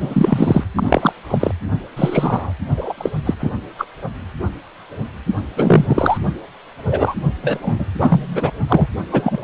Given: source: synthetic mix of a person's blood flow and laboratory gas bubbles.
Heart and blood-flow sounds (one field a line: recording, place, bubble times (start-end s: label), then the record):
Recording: Doppler ultrasound of blood flow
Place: precordium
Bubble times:
0.01-0.64 s: bubbles
0.75-1.12 s: bubbles
1.29-1.51 s: bubbles
1.96-2.52 s: bubbles
2.76-2.93 s: bubbles
2.97-3.09 s: bubbles
3.25-3.34 s: bubbles
3.39-3.50 s: bubbles
3.78-3.85 s: bubbles
5.56-5.85 s: bubbles
5.88-6.17 s: bubbles
6.87-7.14 s: bubbles
7.42-7.84 s: bubbles
7.93-8.51 s: bubbles
8.69-8.87 s: bubbles
9.11-9.44 s: bubbles
From the record:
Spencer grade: 3 (all of the cardiac periods contain showers or single bubble signals, but not dominating or overriding the cardiac motion signals)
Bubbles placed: only in the low amplitude regions of the cardiac cycle